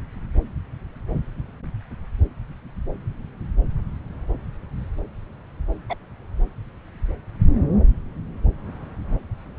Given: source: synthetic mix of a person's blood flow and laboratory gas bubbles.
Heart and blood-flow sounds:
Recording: Doppler ultrasound of blood flow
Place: subclavian vein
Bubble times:
5.89-5.94 s: bubbles
From the record:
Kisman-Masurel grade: 112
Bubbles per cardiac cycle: 1 to 2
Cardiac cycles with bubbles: 1 to 10%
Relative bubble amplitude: moderate (0.250 to 0.450)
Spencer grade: 1 (occasional bubble signal discernible with the cardiac motion signal, with majority of cardiac periods free of bubbles)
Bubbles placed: anywhere in the cardiac cycle

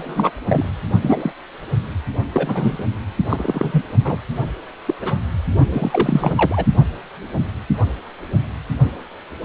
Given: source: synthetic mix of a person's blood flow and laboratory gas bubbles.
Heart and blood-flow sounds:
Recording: Doppler ultrasound of blood flow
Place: precordium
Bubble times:
0.00-0.30 s: bubbles
0.45-0.66 s: bubbles
1.02-1.32 s: bubbles
2.33-2.85 s: bubbles
3.29-3.85 s: bubbles
4.04-4.17 s: bubbles
4.87-4.95 s: bubbles
5.02-5.19 s: bubbles
5.72-6.32 s: bubbles
6.36-6.65 s: bubbles
From the record:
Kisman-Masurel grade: 232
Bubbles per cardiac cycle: several, 3 to 8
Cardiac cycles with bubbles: 50 to 99%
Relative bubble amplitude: moderate (0.250 to 0.450)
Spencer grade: 3 (all of the cardiac periods contain showers or single bubble signals, but not dominating or overriding the cardiac motion signals)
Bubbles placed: only in the low amplitude regions of the cardiac cycle

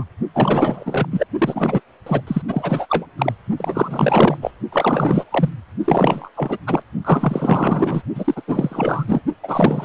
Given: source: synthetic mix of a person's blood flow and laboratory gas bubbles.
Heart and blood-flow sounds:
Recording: Doppler ultrasound of blood flow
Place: precordium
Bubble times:
0.00-0.04 s: bubbles
0.34-1.07 s: bubbles
1.11-1.24 s: bubbles
1.38-1.80 s: bubbles
2.06-2.21 s: bubbles
2.27-2.42 s: bubbles
2.48-3.06 s: bubbles
3.18-3.32 s: bubbles
3.56-4.38 s: bubbles
4.42-4.51 s: bubbles
4.72-5.24 s: bubbles
5.31-5.50 s: bubbles
5.85-6.30 s: bubbles
6.36-6.57 s: bubbles
6.67-6.82 s: bubbles
7.05-8.03 s: bubbles
8.15-8.41 s: bubbles
8.47-9.22 s: bubbles
9.43-9.85 s: bubbles
From the record:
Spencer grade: 4 (maximum detectable bubble signal sounding continuously throughout systole and diastole of every cardiac period, and overriding the amplitude of the normal cardiac signals)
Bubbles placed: only in the low amplitude regions of the cardiac cycle

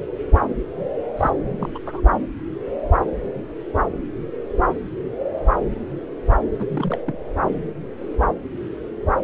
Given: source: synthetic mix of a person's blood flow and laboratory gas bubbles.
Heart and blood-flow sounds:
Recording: Doppler ultrasound of blood flow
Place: subclavian vein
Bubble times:
1.17-1.31 s: bubbles
1.56-1.72 s: bubbles
1.75-1.78 s: bubbles
1.87-2.01 s: bubbles
6.58-6.65 s: bubbles
6.67-6.98 s: bubbles
7.07-7.18 s: bubbles
From the record:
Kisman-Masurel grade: 221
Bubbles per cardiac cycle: several, 3 to 8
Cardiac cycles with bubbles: 10 to 50%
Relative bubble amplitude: barely perceptible (0.100 to 0.250)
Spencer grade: 2 (many but less than half of the cardiac periods contain bubble signals, singularly or in groups)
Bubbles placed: anywhere in the cardiac cycle

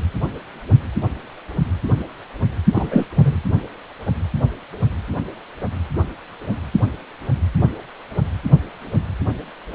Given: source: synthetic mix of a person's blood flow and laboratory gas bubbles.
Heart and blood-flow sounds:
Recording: Doppler ultrasound of blood flow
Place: precordium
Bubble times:
2.75-3.07 s: bubbles
3.15-3.42 s: bubbles
From the record:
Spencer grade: 1 (occasional bubble signal discernible with the cardiac motion signal, with majority of cardiac periods free of bubbles)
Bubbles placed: only in the low amplitude regions of the cardiac cycle

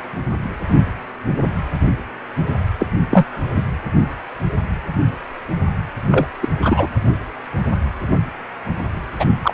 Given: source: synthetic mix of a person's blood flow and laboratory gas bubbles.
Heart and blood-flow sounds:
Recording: Doppler ultrasound of blood flow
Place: precordium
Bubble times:
2.79-2.86 s: bubbles
3.09-3.25 s: bubbles
3.56-3.63 s: bubbles
6.11-6.26 s: bubbles
6.41-6.49 s: bubbles
6.61-6.88 s: bubbles
9.19-9.25 s: bubbles
9.43-9.54 s: bubbles
From the record:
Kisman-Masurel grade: 223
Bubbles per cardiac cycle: several, 3 to 8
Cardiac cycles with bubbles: 10 to 50%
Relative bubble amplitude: loud (0.450 to 0.775)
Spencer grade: 2 (many but less than half of the cardiac periods contain bubble signals, singularly or in groups)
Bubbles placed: anywhere in the cardiac cycle

